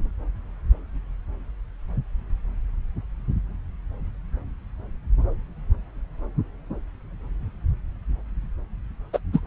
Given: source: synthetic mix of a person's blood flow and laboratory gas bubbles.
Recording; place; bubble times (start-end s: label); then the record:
Doppler ultrasound of blood flow; subclavian vein
9.13-9.19 s: bubbles
9.32-9.40 s: bubbles
From the record:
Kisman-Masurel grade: 213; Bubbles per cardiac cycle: several, 3 to 8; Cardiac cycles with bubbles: 1 to 10%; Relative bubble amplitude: loud (0.450 to 0.775); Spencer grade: 1 (occasional bubble signal discernible with the cardiac motion signal, with majority of cardiac periods free of bubbles); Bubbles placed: anywhere in the cardiac cycle